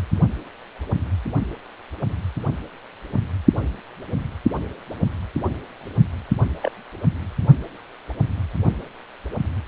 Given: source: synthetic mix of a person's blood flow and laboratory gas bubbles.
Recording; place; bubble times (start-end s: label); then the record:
Doppler ultrasound of blood flow; precordium
6.61-6.71 s: bubbles
From the record:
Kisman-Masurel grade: 111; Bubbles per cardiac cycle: 1 to 2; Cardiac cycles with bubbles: 1 to 10%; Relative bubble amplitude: barely perceptible (0.100 to 0.250); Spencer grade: 1 (occasional bubble signal discernible with the cardiac motion signal, with majority of cardiac periods free of bubbles); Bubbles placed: only in the low amplitude regions of the cardiac cycle